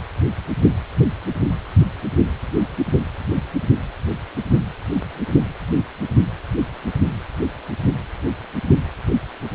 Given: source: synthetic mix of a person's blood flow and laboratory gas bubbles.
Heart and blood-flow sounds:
Doppler ultrasound of blood flow; precordium
no bubbles
From the record:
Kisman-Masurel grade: 000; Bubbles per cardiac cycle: 0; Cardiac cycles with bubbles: 0%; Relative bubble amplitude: no bubbles discernible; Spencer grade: 0 (complete lack of bubble signals)

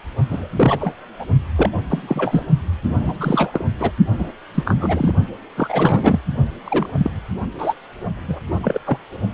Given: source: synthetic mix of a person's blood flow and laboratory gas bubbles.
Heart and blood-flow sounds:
Doppler ultrasound of blood flow; precordium
0.30-0.49 s: bubbles
0.55-0.95 s: bubbles
1.20-1.25 s: bubbles
1.56-1.70 s: bubbles
1.89-2.44 s: bubbles
2.83-3.67 s: bubbles
3.79-3.91 s: bubbles
4.18-4.31 s: bubbles
4.54-5.13 s: bubbles
5.55-6.19 s: bubbles
6.66-7.10 s: bubbles
7.58-7.74 s: bubbles
8.28-8.39 s: bubbles
8.62-8.79 s: bubbles
8.87-8.98 s: bubbles
From the record:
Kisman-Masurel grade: 242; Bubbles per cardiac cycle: several, 3 to 8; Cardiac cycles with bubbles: 100%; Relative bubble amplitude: moderate (0.250 to 0.450); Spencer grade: 3 (all of the cardiac periods contain showers or single bubble signals, but not dominating or overriding the cardiac motion signals); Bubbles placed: only in the low amplitude regions of the cardiac cycle

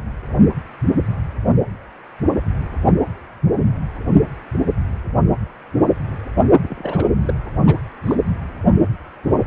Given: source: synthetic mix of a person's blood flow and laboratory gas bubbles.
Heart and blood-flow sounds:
Doppler ultrasound of blood flow; precordium
6.62-7.08 s: bubbles
7.21-7.34 s: bubbles
7.66-7.79 s: bubbles
8.06-8.15 s: bubbles
From the record:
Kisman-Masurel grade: 221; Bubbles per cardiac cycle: several, 3 to 8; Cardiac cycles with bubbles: 10 to 50%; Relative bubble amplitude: barely perceptible (0.100 to 0.250); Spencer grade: 2 (many but less than half of the cardiac periods contain bubble signals, singularly or in groups); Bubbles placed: only in the low amplitude regions of the cardiac cycle

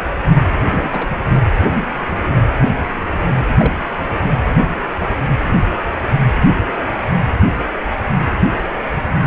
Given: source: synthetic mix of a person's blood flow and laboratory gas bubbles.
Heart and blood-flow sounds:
Doppler ultrasound of blood flow; precordium
0.57-1.08 s: bubbles
3.57-3.73 s: bubbles
3.98-4.15 s: bubbles
From the record:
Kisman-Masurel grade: 122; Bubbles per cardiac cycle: 1 to 2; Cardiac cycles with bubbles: 10 to 50%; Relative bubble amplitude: moderate (0.250 to 0.450); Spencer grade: 2 (many but less than half of the cardiac periods contain bubble signals, singularly or in groups); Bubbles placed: anywhere in the cardiac cycle

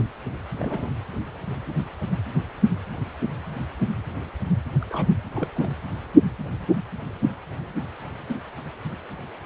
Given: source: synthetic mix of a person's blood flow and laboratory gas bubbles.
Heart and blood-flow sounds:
Doppler ultrasound of blood flow; precordium
0.58-0.93 s: bubbles
4.81-4.85 s: bubbles
4.89-5.10 s: bubbles
5.36-5.47 s: bubbles
5.54-5.70 s: bubbles
From the record:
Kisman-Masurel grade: 221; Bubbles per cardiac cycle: several, 3 to 8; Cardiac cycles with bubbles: 10 to 50%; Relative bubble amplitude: barely perceptible (0.100 to 0.250); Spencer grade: 2 (many but less than half of the cardiac periods contain bubble signals, singularly or in groups); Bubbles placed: anywhere in the cardiac cycle

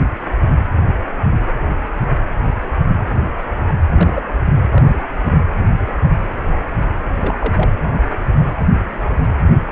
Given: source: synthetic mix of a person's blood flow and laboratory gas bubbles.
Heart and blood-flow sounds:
Doppler ultrasound of blood flow; precordium
3.88-4.22 s: bubbles
4.44-4.54 s: bubbles
4.72-4.84 s: bubbles
4.88-5.06 s: bubbles
7.17-7.35 s: bubbles
7.39-7.70 s: bubbles
From the record:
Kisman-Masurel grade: 222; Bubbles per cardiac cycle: several, 3 to 8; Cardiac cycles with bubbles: 10 to 50%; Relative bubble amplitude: moderate (0.250 to 0.450); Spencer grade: 2 (many but less than half of the cardiac periods contain bubble signals, singularly or in groups); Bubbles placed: anywhere in the cardiac cycle

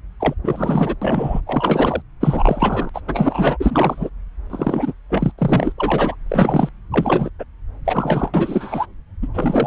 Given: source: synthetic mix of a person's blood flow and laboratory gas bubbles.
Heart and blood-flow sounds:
Doppler ultrasound of blood flow; subclavian vein
0.20-0.34 s: bubbles
0.43-0.95 s: bubbles
1.01-1.41 s: bubbles
1.46-2.02 s: bubbles
2.21-2.90 s: bubbles
2.94-3.01 s: bubbles
3.07-3.57 s: bubbles
3.60-4.09 s: bubbles
4.50-4.93 s: bubbles
5.09-5.31 s: bubbles
5.38-5.72 s: bubbles
5.77-6.15 s: bubbles
6.26-6.69 s: bubbles
6.92-7.30 s: bubbles
7.39-7.44 s: bubbles
7.85-8.30 s: bubbles
8.33-8.86 s: bubbles
9.22-9.28 s: bubbles
9.33-9.67 s: bubbles
From the record:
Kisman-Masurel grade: 343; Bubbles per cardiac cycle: rolling drumbeat, 9 or more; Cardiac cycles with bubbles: 100%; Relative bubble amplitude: loud (0.450 to 0.775); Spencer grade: 3 (all of the cardiac periods contain showers or single bubble signals, but not dominating or overriding the cardiac motion signals); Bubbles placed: anywhere in the cardiac cycle

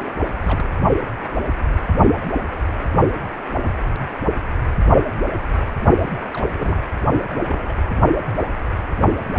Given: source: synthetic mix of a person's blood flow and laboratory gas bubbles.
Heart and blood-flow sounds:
Doppler ultrasound of blood flow; precordium
0.00-0.12 s: bubbles
0.41-0.69 s: bubbles
6.05-6.48 s: bubbles
6.56-6.88 s: bubbles
7.34-7.75 s: bubbles
From the record:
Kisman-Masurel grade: 221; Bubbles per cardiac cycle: several, 3 to 8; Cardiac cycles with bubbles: 10 to 50%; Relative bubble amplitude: barely perceptible (0.100 to 0.250); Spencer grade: 2 (many but less than half of the cardiac periods contain bubble signals, singularly or in groups); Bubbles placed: only in the low amplitude regions of the cardiac cycle

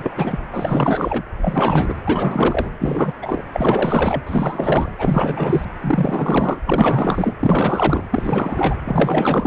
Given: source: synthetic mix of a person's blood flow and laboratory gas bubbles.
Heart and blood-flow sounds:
Doppler ultrasound of blood flow; precordium
0.00-0.11 s: bubbles
0.16-0.39 s: bubbles
0.51-1.23 s: bubbles
1.41-1.95 s: bubbles
2.05-2.70 s: bubbles
2.79-3.18 s: bubbles
3.22-3.42 s: bubbles
3.54-4.91 s: bubbles
4.98-5.66 s: bubbles
5.81-6.60 s: bubbles
6.66-7.37 s: bubbles
7.40-8.03 s: bubbles
8.11-8.75 s: bubbles
8.84-9.47 s: bubbles
From the record:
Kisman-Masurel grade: 444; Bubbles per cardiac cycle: continuous sound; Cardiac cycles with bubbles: 100%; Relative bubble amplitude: maximal (0.775 to 0.999); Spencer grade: 4 (maximum detectable bubble signal sounding continuously throughout systole and diastole of every cardiac period, and overriding the amplitude of the normal cardiac signals); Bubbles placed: anywhere in the cardiac cycle

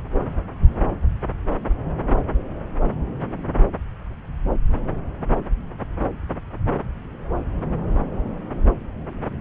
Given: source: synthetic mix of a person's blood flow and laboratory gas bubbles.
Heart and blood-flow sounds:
Doppler ultrasound of blood flow; subclavian vein
no bubbles
From the record:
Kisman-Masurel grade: 000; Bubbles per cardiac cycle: 0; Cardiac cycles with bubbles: 0%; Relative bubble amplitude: no bubbles discernible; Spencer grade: 0 (complete lack of bubble signals)

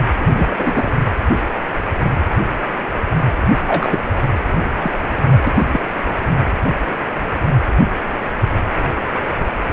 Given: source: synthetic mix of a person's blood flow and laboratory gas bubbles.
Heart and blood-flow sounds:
Doppler ultrasound of blood flow; precordium
0.20-0.28 s: bubbles
0.35-0.92 s: bubbles
3.57-3.61 s: bubbles
3.67-4.00 s: bubbles
4.78-5.00 s: bubbles
5.31-5.40 s: bubbles
5.47-5.66 s: bubbles
5.73-5.90 s: bubbles
From the record:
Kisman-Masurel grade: 222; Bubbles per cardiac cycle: several, 3 to 8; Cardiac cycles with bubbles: 10 to 50%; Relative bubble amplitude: moderate (0.250 to 0.450); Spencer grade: 2 (many but less than half of the cardiac periods contain bubble signals, singularly or in groups); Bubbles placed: anywhere in the cardiac cycle

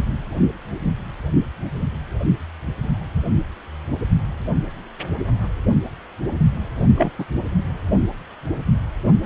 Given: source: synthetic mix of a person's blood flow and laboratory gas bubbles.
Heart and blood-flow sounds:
Doppler ultrasound of blood flow; precordium
6.96-7.11 s: bubbles
7.18-7.25 s: bubbles
From the record:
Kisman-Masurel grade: 122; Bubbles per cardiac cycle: 1 to 2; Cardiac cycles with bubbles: 10 to 50%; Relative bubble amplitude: moderate (0.250 to 0.450); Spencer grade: 2 (many but less than half of the cardiac periods contain bubble signals, singularly or in groups); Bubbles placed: anywhere in the cardiac cycle

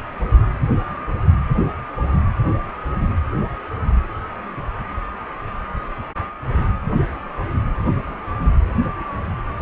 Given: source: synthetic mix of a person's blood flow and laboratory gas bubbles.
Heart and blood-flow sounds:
Doppler ultrasound of blood flow; precordium
no bubbles
From the record:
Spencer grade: 0 (complete lack of bubble signals)

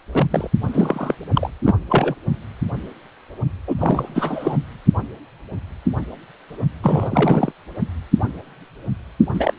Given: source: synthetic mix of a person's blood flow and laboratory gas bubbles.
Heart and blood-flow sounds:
Doppler ultrasound of blood flow; precordium
0.12-0.26 s: bubbles
0.30-0.51 s: bubbles
0.73-1.15 s: bubbles
1.33-1.51 s: bubbles
1.64-1.75 s: bubbles
1.89-2.15 s: bubbles
3.67-4.58 s: bubbles
6.83-7.52 s: bubbles
9.34-9.54 s: bubbles
From the record:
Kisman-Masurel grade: 332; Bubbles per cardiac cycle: rolling drumbeat, 9 or more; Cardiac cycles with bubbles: 50 to 99%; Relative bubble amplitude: moderate (0.250 to 0.450); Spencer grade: 3 (all of the cardiac periods contain showers or single bubble signals, but not dominating or overriding the cardiac motion signals); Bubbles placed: only in the low amplitude regions of the cardiac cycle

